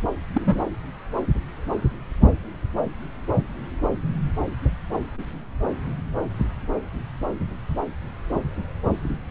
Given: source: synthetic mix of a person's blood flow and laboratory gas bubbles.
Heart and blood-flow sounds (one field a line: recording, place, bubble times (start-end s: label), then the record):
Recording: Doppler ultrasound of blood flow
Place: subclavian vein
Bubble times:
0.33-0.64 s: bubbles
From the record:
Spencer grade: 1 (occasional bubble signal discernible with the cardiac motion signal, with majority of cardiac periods free of bubbles)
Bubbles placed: anywhere in the cardiac cycle